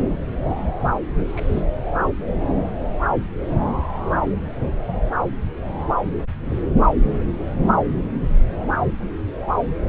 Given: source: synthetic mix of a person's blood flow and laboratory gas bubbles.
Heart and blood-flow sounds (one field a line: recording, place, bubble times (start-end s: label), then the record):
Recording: Doppler ultrasound of blood flow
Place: subclavian vein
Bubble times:
0.00-0.15 s: bubbles
0.44-0.69 s: bubbles
1.27-1.62 s: bubbles
From the record:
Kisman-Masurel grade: 121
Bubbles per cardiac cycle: 1 to 2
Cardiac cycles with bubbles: 10 to 50%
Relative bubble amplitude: barely perceptible (0.100 to 0.250)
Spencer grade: 2 (many but less than half of the cardiac periods contain bubble signals, singularly or in groups)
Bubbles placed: anywhere in the cardiac cycle